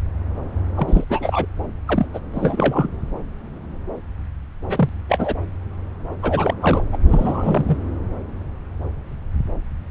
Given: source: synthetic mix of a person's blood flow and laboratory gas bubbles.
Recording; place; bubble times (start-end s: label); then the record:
Doppler ultrasound of blood flow; subclavian vein
0.75-1.04 s: bubbles
1.09-1.45 s: bubbles
1.87-2.06 s: bubbles
2.13-2.19 s: bubbles
2.33-2.88 s: bubbles
4.69-4.89 s: bubbles
5.08-5.35 s: bubbles
6.22-6.54 s: bubbles
6.61-6.83 s: bubbles
6.92-6.97 s: bubbles
7.04-7.78 s: bubbles
From the record:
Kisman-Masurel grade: 232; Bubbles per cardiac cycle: several, 3 to 8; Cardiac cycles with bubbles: 50 to 99%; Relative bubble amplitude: moderate (0.250 to 0.450); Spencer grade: 3 (all of the cardiac periods contain showers or single bubble signals, but not dominating or overriding the cardiac motion signals); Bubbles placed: anywhere in the cardiac cycle